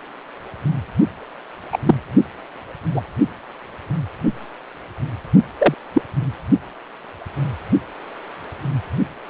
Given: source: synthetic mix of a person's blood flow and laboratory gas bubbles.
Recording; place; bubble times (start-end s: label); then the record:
Doppler ultrasound of blood flow; precordium
1.72-1.78 s: bubbles
1.85-1.94 s: bubbles
2.94-3.02 s: bubbles
5.58-5.74 s: bubbles
5.93-6.01 s: bubbles
From the record:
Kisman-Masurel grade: 123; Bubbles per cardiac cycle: 1 to 2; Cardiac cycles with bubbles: 10 to 50%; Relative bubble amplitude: loud (0.450 to 0.775); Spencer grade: 2 (many but less than half of the cardiac periods contain bubble signals, singularly or in groups); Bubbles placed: only in the low amplitude regions of the cardiac cycle